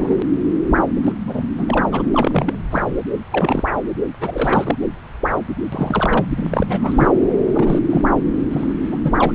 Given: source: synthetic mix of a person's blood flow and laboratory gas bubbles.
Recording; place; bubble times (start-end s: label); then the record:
Doppler ultrasound of blood flow; subclavian vein
0.00-0.21 s: bubbles
1.03-1.12 s: bubbles
1.27-1.43 s: bubbles
1.58-1.86 s: bubbles
1.91-2.02 s: bubbles
2.12-2.54 s: bubbles
2.70-2.85 s: bubbles
3.32-3.71 s: bubbles
4.21-4.75 s: bubbles
4.81-4.88 s: bubbles
5.72-7.08 s: bubbles
7.53-7.79 s: bubbles
7.89-8.10 s: bubbles
8.51-8.72 s: bubbles
8.88-9.15 s: bubbles
9.19-9.32 s: bubbles
From the record:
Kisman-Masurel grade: 242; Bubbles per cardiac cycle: several, 3 to 8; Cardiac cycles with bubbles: 100%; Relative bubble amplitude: moderate (0.250 to 0.450); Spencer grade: 3 (all of the cardiac periods contain showers or single bubble signals, but not dominating or overriding the cardiac motion signals); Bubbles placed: anywhere in the cardiac cycle